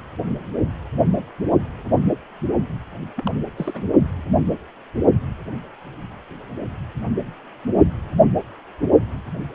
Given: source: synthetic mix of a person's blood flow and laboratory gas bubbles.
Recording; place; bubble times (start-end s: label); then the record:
Doppler ultrasound of blood flow; precordium
3.17-3.31 s: bubbles
3.58-3.82 s: bubbles
From the record:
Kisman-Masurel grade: 221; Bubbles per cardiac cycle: several, 3 to 8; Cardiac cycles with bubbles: 10 to 50%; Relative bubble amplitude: barely perceptible (0.100 to 0.250); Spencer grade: 2 (many but less than half of the cardiac periods contain bubble signals, singularly or in groups); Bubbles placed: only in the low amplitude regions of the cardiac cycle